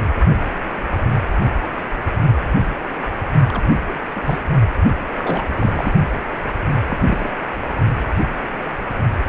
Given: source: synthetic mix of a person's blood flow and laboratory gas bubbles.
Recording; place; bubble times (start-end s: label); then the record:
Doppler ultrasound of blood flow; precordium
3.48-3.63 s: bubbles
3.88-4.00 s: bubbles
4.16-4.21 s: bubbles
4.25-4.43 s: bubbles
5.17-5.47 s: bubbles
5.58-5.93 s: bubbles
6.88-7.29 s: bubbles
From the record:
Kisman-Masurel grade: 232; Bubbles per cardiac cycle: several, 3 to 8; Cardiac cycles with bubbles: 50 to 99%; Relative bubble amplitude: moderate (0.250 to 0.450); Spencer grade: 3 (all of the cardiac periods contain showers or single bubble signals, but not dominating or overriding the cardiac motion signals); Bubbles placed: only in the low amplitude regions of the cardiac cycle